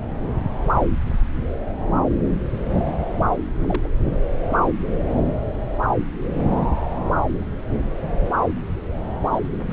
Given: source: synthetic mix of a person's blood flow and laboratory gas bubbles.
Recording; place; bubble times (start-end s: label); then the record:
Doppler ultrasound of blood flow; subclavian vein
3.64-3.90 s: bubbles
9.31-9.40 s: bubbles
9.67-9.73 s: bubbles
From the record:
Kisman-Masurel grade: 121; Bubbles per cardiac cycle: 1 to 2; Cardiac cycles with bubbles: 10 to 50%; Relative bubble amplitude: barely perceptible (0.100 to 0.250); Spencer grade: 2 (many but less than half of the cardiac periods contain bubble signals, singularly or in groups); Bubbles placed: anywhere in the cardiac cycle